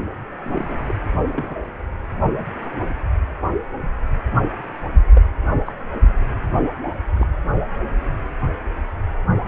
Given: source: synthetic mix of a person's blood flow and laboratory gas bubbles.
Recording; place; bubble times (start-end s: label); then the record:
Doppler ultrasound of blood flow; precordium
0.45-0.77 s: bubbles
0.88-0.94 s: bubbles
1.29-1.55 s: bubbles
5.13-5.29 s: bubbles
5.66-5.72 s: bubbles
7.13-7.27 s: bubbles
From the record:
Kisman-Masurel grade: 121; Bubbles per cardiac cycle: 1 to 2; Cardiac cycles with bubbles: 10 to 50%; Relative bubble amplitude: barely perceptible (0.100 to 0.250); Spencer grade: 2 (many but less than half of the cardiac periods contain bubble signals, singularly or in groups); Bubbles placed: only in the low amplitude regions of the cardiac cycle